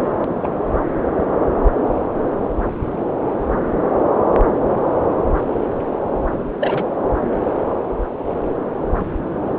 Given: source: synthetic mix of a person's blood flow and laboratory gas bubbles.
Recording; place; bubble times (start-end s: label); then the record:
Doppler ultrasound of blood flow; subclavian vein
0.43-0.47 s: bubbles
6.60-6.86 s: bubbles
9.00-9.04 s: bubbles
From the record:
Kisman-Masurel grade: 122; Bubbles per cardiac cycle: 1 to 2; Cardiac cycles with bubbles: 10 to 50%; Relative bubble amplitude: moderate (0.250 to 0.450); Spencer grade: 2 (many but less than half of the cardiac periods contain bubble signals, singularly or in groups); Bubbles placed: anywhere in the cardiac cycle